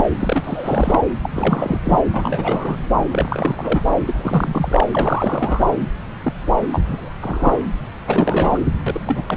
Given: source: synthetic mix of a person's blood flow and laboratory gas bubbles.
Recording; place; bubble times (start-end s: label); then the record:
Doppler ultrasound of blood flow; subclavian vein
0.00-0.04 s: bubbles
0.19-1.00 s: bubbles
1.22-1.30 s: bubbles
1.32-1.80 s: bubbles
1.84-1.99 s: bubbles
2.13-2.76 s: bubbles
3.09-3.85 s: bubbles
4.06-4.84 s: bubbles
4.91-5.64 s: bubbles
6.22-6.33 s: bubbles
6.72-7.09 s: bubbles
7.21-7.61 s: bubbles
8.07-8.61 s: bubbles
8.86-9.01 s: bubbles
9.07-9.23 s: bubbles
9.28-9.37 s: bubbles
From the record:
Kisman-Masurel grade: 342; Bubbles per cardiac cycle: rolling drumbeat, 9 or more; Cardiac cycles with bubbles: 100%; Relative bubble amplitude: moderate (0.250 to 0.450); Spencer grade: 3 (all of the cardiac periods contain showers or single bubble signals, but not dominating or overriding the cardiac motion signals); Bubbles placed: anywhere in the cardiac cycle